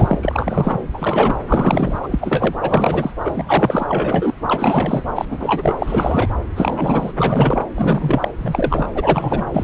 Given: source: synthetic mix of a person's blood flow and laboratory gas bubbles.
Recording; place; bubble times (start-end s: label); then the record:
Doppler ultrasound of blood flow; subclavian vein
0.00-0.19 s: bubbles
0.22-0.82 s: bubbles
0.93-1.36 s: bubbles
1.48-1.98 s: bubbles
2.02-2.56 s: bubbles
2.62-3.12 s: bubbles
3.25-3.84 s: bubbles
3.88-4.32 s: bubbles
4.47-5.02 s: bubbles
5.15-5.25 s: bubbles
5.29-5.73 s: bubbles
5.79-6.28 s: bubbles
6.55-7.11 s: bubbles
7.17-7.63 s: bubbles
7.75-8.30 s: bubbles
8.40-8.87 s: bubbles
8.95-9.44 s: bubbles
9.54-9.64 s: bubbles
From the record:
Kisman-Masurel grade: 342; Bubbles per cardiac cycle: rolling drumbeat, 9 or more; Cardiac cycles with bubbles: 100%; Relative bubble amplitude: moderate (0.250 to 0.450); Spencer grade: 3 (all of the cardiac periods contain showers or single bubble signals, but not dominating or overriding the cardiac motion signals); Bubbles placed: anywhere in the cardiac cycle